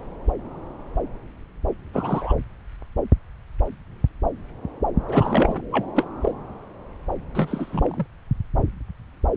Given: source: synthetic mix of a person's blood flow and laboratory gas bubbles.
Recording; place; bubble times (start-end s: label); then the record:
Doppler ultrasound of blood flow; subclavian vein
1.93-2.33 s: bubbles
5.08-5.61 s: bubbles
5.72-5.87 s: bubbles
5.95-6.04 s: bubbles
6.21-6.32 s: bubbles
7.35-8.06 s: bubbles
From the record:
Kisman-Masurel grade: 222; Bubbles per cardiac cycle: several, 3 to 8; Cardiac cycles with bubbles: 10 to 50%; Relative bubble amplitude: moderate (0.250 to 0.450); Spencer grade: 2 (many but less than half of the cardiac periods contain bubble signals, singularly or in groups); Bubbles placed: anywhere in the cardiac cycle